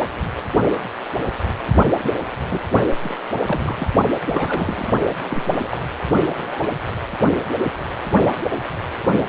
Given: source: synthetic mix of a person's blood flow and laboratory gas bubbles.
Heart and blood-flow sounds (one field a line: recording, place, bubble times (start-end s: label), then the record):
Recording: Doppler ultrasound of blood flow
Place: precordium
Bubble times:
1.78-1.93 s: bubbles
1.97-2.11 s: bubbles
2.48-2.63 s: bubbles
2.75-2.83 s: bubbles
3.04-3.15 s: bubbles
3.48-3.74 s: bubbles
3.76-3.87 s: bubbles
3.98-4.01 s: bubbles
4.27-4.92 s: bubbles
5.21-5.81 s: bubbles
6.12-6.74 s: bubbles
From the record:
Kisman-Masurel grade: 232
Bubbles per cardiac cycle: several, 3 to 8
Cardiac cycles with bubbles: 50 to 99%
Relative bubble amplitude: moderate (0.250 to 0.450)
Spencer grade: 3 (all of the cardiac periods contain showers or single bubble signals, but not dominating or overriding the cardiac motion signals)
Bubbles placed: anywhere in the cardiac cycle